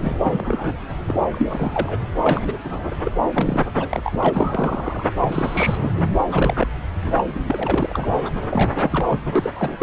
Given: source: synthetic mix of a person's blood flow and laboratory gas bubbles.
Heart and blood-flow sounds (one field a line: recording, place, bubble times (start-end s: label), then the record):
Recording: Doppler ultrasound of blood flow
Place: subclavian vein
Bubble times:
0.00-0.17 s: bubbles
0.23-0.77 s: bubbles
1.06-1.21 s: bubbles
1.32-1.99 s: bubbles
2.17-2.58 s: bubbles
2.64-2.95 s: bubbles
3.04-3.12 s: bubbles
3.32-3.61 s: bubbles
3.77-3.88 s: bubbles
3.90-4.16 s: bubbles
4.19-5.04 s: bubbles
5.21-5.92 s: bubbles
5.96-6.03 s: bubbles
6.17-6.25 s: bubbles
6.28-6.67 s: bubbles
7.02-7.12 s: bubbles
7.17-7.25 s: bubbles
7.29-8.10 s: bubbles
8.25-8.31 s: bubbles
8.44-9.18 s: bubbles
9.35-9.50 s: bubbles
9.55-9.83 s: bubbles
From the record:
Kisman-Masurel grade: 342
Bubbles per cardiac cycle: rolling drumbeat, 9 or more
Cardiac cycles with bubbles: 100%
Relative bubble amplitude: moderate (0.250 to 0.450)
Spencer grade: 3 (all of the cardiac periods contain showers or single bubble signals, but not dominating or overriding the cardiac motion signals)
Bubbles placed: anywhere in the cardiac cycle